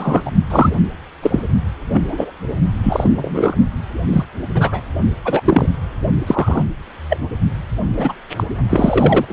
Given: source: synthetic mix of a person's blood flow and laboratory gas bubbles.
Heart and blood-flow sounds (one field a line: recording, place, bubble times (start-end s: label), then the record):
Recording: Doppler ultrasound of blood flow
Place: precordium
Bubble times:
0.00-0.21 s: bubbles
0.26-0.30 s: bubbles
0.50-0.80 s: bubbles
1.22-1.40 s: bubbles
1.93-2.31 s: bubbles
2.83-3.56 s: bubbles
4.12-4.24 s: bubbles
4.54-4.83 s: bubbles
5.24-5.42 s: bubbles
5.44-5.69 s: bubbles
6.26-6.66 s: bubbles
7.09-7.17 s: bubbles
7.96-8.14 s: bubbles
8.36-8.44 s: bubbles
8.70-9.25 s: bubbles
9.28-9.33 s: bubbles
From the record:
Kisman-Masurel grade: 243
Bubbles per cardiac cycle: several, 3 to 8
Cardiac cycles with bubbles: 100%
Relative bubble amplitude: loud (0.450 to 0.775)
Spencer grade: 3 (all of the cardiac periods contain showers or single bubble signals, but not dominating or overriding the cardiac motion signals)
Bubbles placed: only in the low amplitude regions of the cardiac cycle